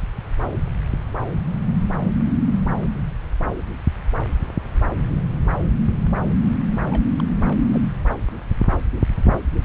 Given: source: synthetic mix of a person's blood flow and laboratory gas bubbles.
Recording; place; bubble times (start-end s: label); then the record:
Doppler ultrasound of blood flow; subclavian vein
6.90-7.04 s: bubbles
7.20-7.22 s: bubbles
7.46-7.57 s: bubbles
7.72-7.79 s: bubbles
From the record:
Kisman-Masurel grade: 211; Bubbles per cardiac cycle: several, 3 to 8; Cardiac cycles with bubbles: 1 to 10%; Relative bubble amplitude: barely perceptible (0.100 to 0.250); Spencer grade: 1 (occasional bubble signal discernible with the cardiac motion signal, with majority of cardiac periods free of bubbles); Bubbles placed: anywhere in the cardiac cycle